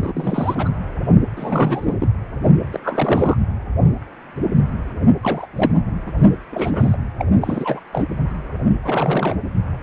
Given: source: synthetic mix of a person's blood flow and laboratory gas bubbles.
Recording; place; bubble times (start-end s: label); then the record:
Doppler ultrasound of blood flow; precordium
0.00-0.73 s: bubbles
1.36-1.97 s: bubbles
2.00-2.08 s: bubbles
2.72-2.80 s: bubbles
2.83-3.38 s: bubbles
5.21-5.46 s: bubbles
5.53-5.75 s: bubbles
6.06-6.12 s: bubbles
6.18-6.35 s: bubbles
6.52-6.96 s: bubbles
7.18-7.25 s: bubbles
7.42-7.80 s: bubbles
7.93-8.04 s: bubbles
8.82-9.37 s: bubbles
From the record:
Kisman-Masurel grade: 332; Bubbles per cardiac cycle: rolling drumbeat, 9 or more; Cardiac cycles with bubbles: 50 to 99%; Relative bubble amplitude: moderate (0.250 to 0.450); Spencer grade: 3 (all of the cardiac periods contain showers or single bubble signals, but not dominating or overriding the cardiac motion signals); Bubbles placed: anywhere in the cardiac cycle